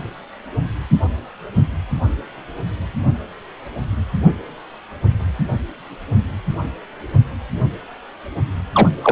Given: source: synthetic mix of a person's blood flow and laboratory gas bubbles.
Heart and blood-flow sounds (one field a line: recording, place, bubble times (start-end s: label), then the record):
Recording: Doppler ultrasound of blood flow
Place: precordium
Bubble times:
8.72-8.88 s: bubbles
9.02-9.12 s: bubbles
From the record:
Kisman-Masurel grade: 213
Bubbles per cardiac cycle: several, 3 to 8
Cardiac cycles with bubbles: 1 to 10%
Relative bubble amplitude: loud (0.450 to 0.775)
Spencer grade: 1 (occasional bubble signal discernible with the cardiac motion signal, with majority of cardiac periods free of bubbles)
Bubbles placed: anywhere in the cardiac cycle